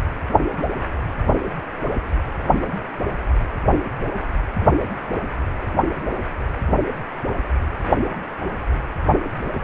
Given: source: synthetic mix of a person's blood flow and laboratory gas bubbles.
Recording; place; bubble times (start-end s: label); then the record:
Doppler ultrasound of blood flow; precordium
no bubbles
From the record:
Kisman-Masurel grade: 000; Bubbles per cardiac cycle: 0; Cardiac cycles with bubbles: 0%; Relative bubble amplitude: no bubbles discernible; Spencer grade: 0 (complete lack of bubble signals)